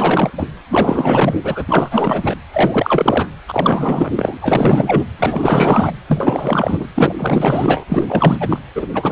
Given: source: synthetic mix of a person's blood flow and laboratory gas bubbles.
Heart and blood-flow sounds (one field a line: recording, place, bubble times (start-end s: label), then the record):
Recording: Doppler ultrasound of blood flow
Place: precordium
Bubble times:
0.00-0.30 s: bubbles
0.38-0.46 s: bubbles
0.69-1.64 s: bubbles
1.68-2.38 s: bubbles
2.52-3.28 s: bubbles
3.48-4.13 s: bubbles
4.17-4.38 s: bubbles
4.40-5.05 s: bubbles
5.18-5.93 s: bubbles
6.08-6.88 s: bubbles
6.95-7.13 s: bubbles
7.17-7.85 s: bubbles
7.89-8.60 s: bubbles
8.75-8.88 s: bubbles
8.94-9.12 s: bubbles
From the record:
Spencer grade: 4 (maximum detectable bubble signal sounding continuously throughout systole and diastole of every cardiac period, and overriding the amplitude of the normal cardiac signals)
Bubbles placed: anywhere in the cardiac cycle